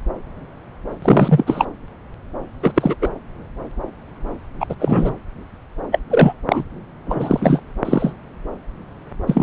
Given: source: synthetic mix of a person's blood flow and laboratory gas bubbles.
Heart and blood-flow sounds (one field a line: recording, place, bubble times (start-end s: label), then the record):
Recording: Doppler ultrasound of blood flow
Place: subclavian vein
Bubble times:
1.02-1.66 s: bubbles
2.62-2.72 s: bubbles
2.75-2.95 s: bubbles
3.01-3.10 s: bubbles
4.59-4.66 s: bubbles
4.69-4.75 s: bubbles
4.79-5.14 s: bubbles
5.91-5.99 s: bubbles
6.09-6.33 s: bubbles
6.49-6.64 s: bubbles
7.06-7.59 s: bubbles
7.84-8.15 s: bubbles
9.27-9.43 s: bubbles
From the record:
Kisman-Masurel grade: 223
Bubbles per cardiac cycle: several, 3 to 8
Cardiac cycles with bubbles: 10 to 50%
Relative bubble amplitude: loud (0.450 to 0.775)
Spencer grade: 2 (many but less than half of the cardiac periods contain bubble signals, singularly or in groups)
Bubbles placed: anywhere in the cardiac cycle